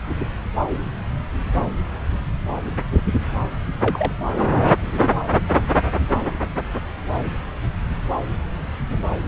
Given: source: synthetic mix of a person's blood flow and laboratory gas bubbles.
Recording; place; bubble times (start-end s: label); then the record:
Doppler ultrasound of blood flow; subclavian vein
3.81-4.12 s: bubbles
From the record:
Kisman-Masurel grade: 112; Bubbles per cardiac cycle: 1 to 2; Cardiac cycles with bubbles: 1 to 10%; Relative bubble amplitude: moderate (0.250 to 0.450); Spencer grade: 1 (occasional bubble signal discernible with the cardiac motion signal, with majority of cardiac periods free of bubbles); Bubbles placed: anywhere in the cardiac cycle